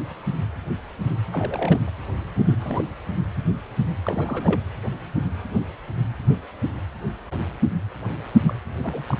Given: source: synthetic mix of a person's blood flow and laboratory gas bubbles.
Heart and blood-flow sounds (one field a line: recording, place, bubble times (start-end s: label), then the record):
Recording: Doppler ultrasound of blood flow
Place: precordium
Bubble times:
1.33-1.80 s: bubbles
1.87-1.90 s: bubbles
2.46-2.91 s: bubbles
4.04-4.60 s: bubbles
8.48-8.59 s: bubbles
8.79-9.18 s: bubbles
From the record:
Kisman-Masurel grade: 221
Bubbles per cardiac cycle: several, 3 to 8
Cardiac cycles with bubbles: 10 to 50%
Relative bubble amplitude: barely perceptible (0.100 to 0.250)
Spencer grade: 2 (many but less than half of the cardiac periods contain bubble signals, singularly or in groups)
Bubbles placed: anywhere in the cardiac cycle